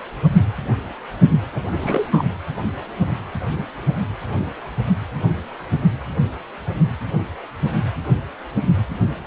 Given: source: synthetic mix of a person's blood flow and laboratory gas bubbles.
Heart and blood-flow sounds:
Doppler ultrasound of blood flow; precordium
1.53-1.63 s: bubbles
1.80-2.08 s: bubbles
2.12-2.25 s: bubbles
From the record:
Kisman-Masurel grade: 212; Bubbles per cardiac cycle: several, 3 to 8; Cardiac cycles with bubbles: 1 to 10%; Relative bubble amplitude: moderate (0.250 to 0.450); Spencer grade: 1 (occasional bubble signal discernible with the cardiac motion signal, with majority of cardiac periods free of bubbles); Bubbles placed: anywhere in the cardiac cycle

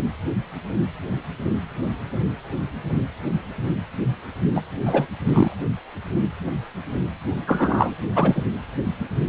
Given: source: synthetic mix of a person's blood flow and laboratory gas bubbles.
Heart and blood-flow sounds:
Doppler ultrasound of blood flow; precordium
4.55-4.61 s: bubbles
4.85-5.06 s: bubbles
5.25-5.56 s: bubbles
7.46-7.95 s: bubbles
8.15-8.44 s: bubbles
From the record:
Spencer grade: 2 (many but less than half of the cardiac periods contain bubble signals, singularly or in groups); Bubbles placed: only in the low amplitude regions of the cardiac cycle

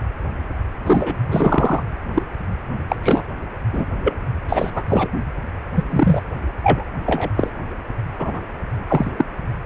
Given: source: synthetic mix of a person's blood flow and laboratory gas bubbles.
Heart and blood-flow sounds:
Doppler ultrasound of blood flow; precordium
0.84-1.16 s: bubbles
1.28-1.82 s: bubbles
2.14-2.22 s: bubbles
2.88-2.96 s: bubbles
3.02-3.23 s: bubbles
3.72-3.85 s: bubbles
4.04-4.17 s: bubbles
4.48-4.84 s: bubbles
4.88-5.08 s: bubbles
5.75-5.84 s: bubbles
5.91-6.21 s: bubbles
6.63-6.84 s: bubbles
7.05-7.30 s: bubbles
7.35-7.50 s: bubbles
8.19-8.42 s: bubbles
8.87-9.11 s: bubbles
9.18-9.25 s: bubbles
From the record:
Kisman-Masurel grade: 243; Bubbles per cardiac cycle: several, 3 to 8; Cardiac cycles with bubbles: 100%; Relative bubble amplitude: loud (0.450 to 0.775); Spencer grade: 3 (all of the cardiac periods contain showers or single bubble signals, but not dominating or overriding the cardiac motion signals); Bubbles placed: only in the low amplitude regions of the cardiac cycle

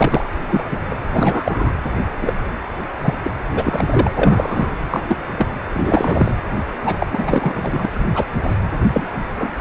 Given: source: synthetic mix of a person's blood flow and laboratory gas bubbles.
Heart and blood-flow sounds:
Doppler ultrasound of blood flow; precordium
0.00-0.23 s: bubbles
0.50-0.64 s: bubbles
0.70-0.78 s: bubbles
0.90-0.94 s: bubbles
1.11-1.73 s: bubbles
2.22-2.33 s: bubbles
3.03-3.15 s: bubbles
3.24-3.31 s: bubbles
3.55-4.11 s: bubbles
4.17-4.71 s: bubbles
4.91-5.01 s: bubbles
5.08-5.19 s: bubbles
5.38-5.47 s: bubbles
5.72-6.35 s: bubbles
6.84-6.97 s: bubbles
7.00-7.07 s: bubbles
7.12-7.86 s: bubbles
7.91-8.05 s: bubbles
8.14-8.25 s: bubbles
8.43-8.55 s: bubbles
8.92-9.06 s: bubbles
9.36-9.52 s: bubbles
From the record:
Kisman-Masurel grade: 243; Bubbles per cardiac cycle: several, 3 to 8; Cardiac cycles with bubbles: 100%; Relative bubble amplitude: loud (0.450 to 0.775); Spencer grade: 3 (all of the cardiac periods contain showers or single bubble signals, but not dominating or overriding the cardiac motion signals); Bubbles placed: anywhere in the cardiac cycle

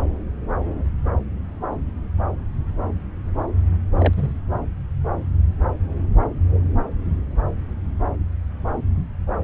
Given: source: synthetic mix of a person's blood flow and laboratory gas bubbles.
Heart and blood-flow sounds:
Doppler ultrasound of blood flow; subclavian vein
3.98-4.14 s: bubbles
4.16-4.34 s: bubbles
From the record:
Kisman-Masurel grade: 112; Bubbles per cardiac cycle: 1 to 2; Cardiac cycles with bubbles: 1 to 10%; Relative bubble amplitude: moderate (0.250 to 0.450); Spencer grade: 1 (occasional bubble signal discernible with the cardiac motion signal, with majority of cardiac periods free of bubbles); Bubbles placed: anywhere in the cardiac cycle

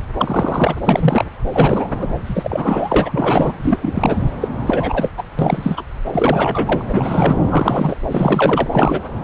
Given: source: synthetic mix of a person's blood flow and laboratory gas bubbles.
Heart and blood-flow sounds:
Doppler ultrasound of blood flow; subclavian vein
0.18-0.76 s: bubbles
0.85-1.24 s: bubbles
1.52-1.88 s: bubbles
2.01-2.10 s: bubbles
2.27-3.54 s: bubbles
3.62-4.17 s: bubbles
4.41-4.49 s: bubbles
4.67-5.11 s: bubbles
5.17-5.24 s: bubbles
5.38-5.83 s: bubbles
6.12-6.83 s: bubbles
6.88-7.38 s: bubbles
7.49-7.96 s: bubbles
8.08-8.68 s: bubbles
8.72-9.01 s: bubbles
From the record:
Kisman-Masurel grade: 333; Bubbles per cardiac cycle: rolling drumbeat, 9 or more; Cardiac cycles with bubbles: 50 to 99%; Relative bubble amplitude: loud (0.450 to 0.775); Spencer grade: 3 (all of the cardiac periods contain showers or single bubble signals, but not dominating or overriding the cardiac motion signals); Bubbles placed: anywhere in the cardiac cycle

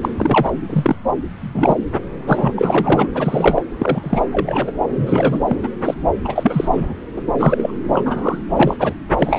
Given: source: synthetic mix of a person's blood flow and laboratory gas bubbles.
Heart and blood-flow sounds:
Doppler ultrasound of blood flow; subclavian vein
0.02-0.11 s: bubbles
0.18-0.52 s: bubbles
0.70-0.96 s: bubbles
1.40-1.81 s: bubbles
2.27-2.54 s: bubbles
2.56-3.08 s: bubbles
3.14-3.62 s: bubbles
3.78-4.21 s: bubbles
4.32-4.71 s: bubbles
4.95-5.39 s: bubbles
5.47-5.56 s: bubbles
5.62-5.69 s: bubbles
5.85-5.94 s: bubbles
6.24-6.69 s: bubbles
6.72-6.93 s: bubbles
7.16-7.22 s: bubbles
7.38-7.74 s: bubbles
7.93-8.39 s: bubbles
8.55-8.76 s: bubbles
8.79-8.93 s: bubbles
9.18-9.39 s: bubbles
From the record:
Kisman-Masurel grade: 243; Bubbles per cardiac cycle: several, 3 to 8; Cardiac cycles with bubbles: 100%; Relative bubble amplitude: loud (0.450 to 0.775); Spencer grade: 3 (all of the cardiac periods contain showers or single bubble signals, but not dominating or overriding the cardiac motion signals); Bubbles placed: anywhere in the cardiac cycle

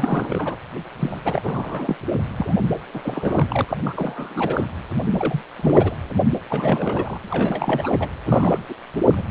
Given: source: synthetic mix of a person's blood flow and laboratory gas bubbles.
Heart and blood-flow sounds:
Doppler ultrasound of blood flow; precordium
0.00-0.56 s: bubbles
0.99-1.19 s: bubbles
1.25-1.96 s: bubbles
2.36-2.54 s: bubbles
2.94-3.77 s: bubbles
3.86-4.68 s: bubbles
5.12-5.42 s: bubbles
5.56-5.95 s: bubbles
6.32-6.40 s: bubbles
6.50-7.17 s: bubbles
7.24-7.97 s: bubbles
8.00-8.09 s: bubbles
8.26-8.58 s: bubbles
8.69-8.74 s: bubbles
8.96-9.02 s: bubbles
9.06-9.22 s: bubbles
From the record:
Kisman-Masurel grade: 342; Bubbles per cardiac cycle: rolling drumbeat, 9 or more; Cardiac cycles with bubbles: 100%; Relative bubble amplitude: moderate (0.250 to 0.450); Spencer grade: 3 (all of the cardiac periods contain showers or single bubble signals, but not dominating or overriding the cardiac motion signals); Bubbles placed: anywhere in the cardiac cycle

